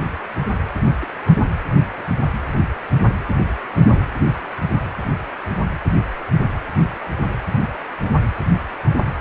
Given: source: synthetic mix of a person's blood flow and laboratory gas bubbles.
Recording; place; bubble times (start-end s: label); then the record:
Doppler ultrasound of blood flow; precordium
1.00-1.06 s: bubbles
1.26-1.34 s: bubbles
From the record:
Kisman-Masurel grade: 211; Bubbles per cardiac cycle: several, 3 to 8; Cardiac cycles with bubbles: 1 to 10%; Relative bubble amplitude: barely perceptible (0.100 to 0.250); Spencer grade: 1 (occasional bubble signal discernible with the cardiac motion signal, with majority of cardiac periods free of bubbles); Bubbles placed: anywhere in the cardiac cycle